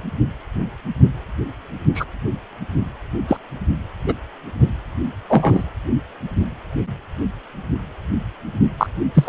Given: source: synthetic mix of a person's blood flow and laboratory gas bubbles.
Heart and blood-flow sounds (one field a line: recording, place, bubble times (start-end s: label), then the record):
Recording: Doppler ultrasound of blood flow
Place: precordium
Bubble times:
1.94-2.04 s: bubbles
3.28-3.37 s: bubbles
4.08-4.13 s: bubbles
5.29-5.63 s: bubbles
8.77-8.87 s: bubbles
9.14-9.29 s: bubbles
From the record:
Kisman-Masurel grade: 123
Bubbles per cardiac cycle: 1 to 2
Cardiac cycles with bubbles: 10 to 50%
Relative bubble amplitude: loud (0.450 to 0.775)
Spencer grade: 2 (many but less than half of the cardiac periods contain bubble signals, singularly or in groups)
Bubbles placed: anywhere in the cardiac cycle